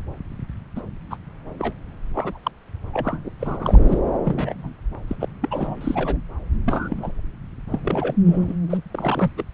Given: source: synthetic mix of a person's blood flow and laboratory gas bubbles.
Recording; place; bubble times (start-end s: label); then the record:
Doppler ultrasound of blood flow; subclavian vein
0.76-0.82 s: bubbles
1.10-1.17 s: bubbles
1.58-1.73 s: bubbles
2.14-2.39 s: bubbles
2.43-2.51 s: bubbles
2.93-3.30 s: bubbles
3.40-3.98 s: bubbles
4.25-4.73 s: bubbles
5.07-5.15 s: bubbles
5.19-5.25 s: bubbles
5.42-6.17 s: bubbles
6.65-7.12 s: bubbles
7.71-7.80 s: bubbles
7.83-8.17 s: bubbles
8.25-8.55 s: bubbles
8.70-8.78 s: bubbles
8.91-9.30 s: bubbles
9.37-9.44 s: bubbles
From the record:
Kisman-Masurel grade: 232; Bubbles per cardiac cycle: several, 3 to 8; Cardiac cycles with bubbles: 50 to 99%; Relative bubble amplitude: moderate (0.250 to 0.450); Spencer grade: 3 (all of the cardiac periods contain showers or single bubble signals, but not dominating or overriding the cardiac motion signals); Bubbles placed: anywhere in the cardiac cycle